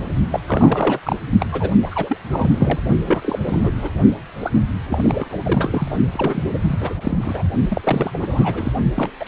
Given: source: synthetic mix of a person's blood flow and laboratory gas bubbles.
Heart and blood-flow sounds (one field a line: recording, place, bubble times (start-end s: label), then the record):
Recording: Doppler ultrasound of blood flow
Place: precordium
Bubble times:
0.31-0.40 s: bubbles
0.46-0.99 s: bubbles
1.03-1.16 s: bubbles
1.40-1.46 s: bubbles
1.51-1.71 s: bubbles
1.82-2.17 s: bubbles
2.31-2.79 s: bubbles
3.06-3.39 s: bubbles
3.42-3.90 s: bubbles
4.40-4.50 s: bubbles
4.90-5.37 s: bubbles
5.44-5.98 s: bubbles
6.12-6.94 s: bubbles
6.97-7.42 s: bubbles
7.70-8.11 s: bubbles
8.13-8.72 s: bubbles
8.96-9.10 s: bubbles
9.19-9.28 s: bubbles
From the record:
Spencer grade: 3 (all of the cardiac periods contain showers or single bubble signals, but not dominating or overriding the cardiac motion signals)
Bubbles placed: only in the low amplitude regions of the cardiac cycle